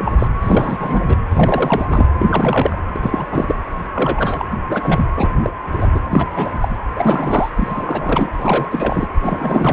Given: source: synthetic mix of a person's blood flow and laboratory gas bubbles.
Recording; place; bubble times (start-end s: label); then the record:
Doppler ultrasound of blood flow; precordium
0.00-0.28 s: bubbles
0.41-1.17 s: bubbles
1.31-1.87 s: bubbles
1.90-2.06 s: bubbles
2.19-2.76 s: bubbles
2.94-3.27 s: bubbles
3.31-3.55 s: bubbles
3.94-4.45 s: bubbles
4.69-5.06 s: bubbles
5.16-5.31 s: bubbles
5.43-5.50 s: bubbles
5.79-5.88 s: bubbles
5.94-6.00 s: bubbles
6.10-6.28 s: bubbles
6.34-6.58 s: bubbles
6.60-6.68 s: bubbles
6.95-7.51 s: bubbles
7.56-8.29 s: bubbles
8.38-8.68 s: bubbles
8.71-9.08 s: bubbles
9.22-9.73 s: bubbles
From the record:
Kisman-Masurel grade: 333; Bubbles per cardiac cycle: rolling drumbeat, 9 or more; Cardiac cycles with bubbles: 50 to 99%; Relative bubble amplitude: loud (0.450 to 0.775); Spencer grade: 3 (all of the cardiac periods contain showers or single bubble signals, but not dominating or overriding the cardiac motion signals); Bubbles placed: anywhere in the cardiac cycle